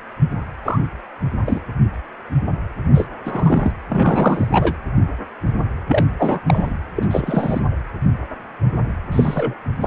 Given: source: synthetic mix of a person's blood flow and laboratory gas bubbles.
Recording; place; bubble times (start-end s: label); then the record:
Doppler ultrasound of blood flow; precordium
0.64-0.79 s: bubbles
1.46-1.60 s: bubbles
2.94-3.07 s: bubbles
3.25-3.72 s: bubbles
3.89-4.74 s: bubbles
5.88-6.05 s: bubbles
6.09-6.39 s: bubbles
6.46-6.73 s: bubbles
6.96-7.07 s: bubbles
7.11-7.61 s: bubbles
9.12-9.54 s: bubbles
9.80-9.87 s: bubbles
From the record:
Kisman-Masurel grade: 232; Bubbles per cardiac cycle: several, 3 to 8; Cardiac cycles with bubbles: 50 to 99%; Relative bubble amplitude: moderate (0.250 to 0.450); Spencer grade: 3 (all of the cardiac periods contain showers or single bubble signals, but not dominating or overriding the cardiac motion signals); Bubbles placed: anywhere in the cardiac cycle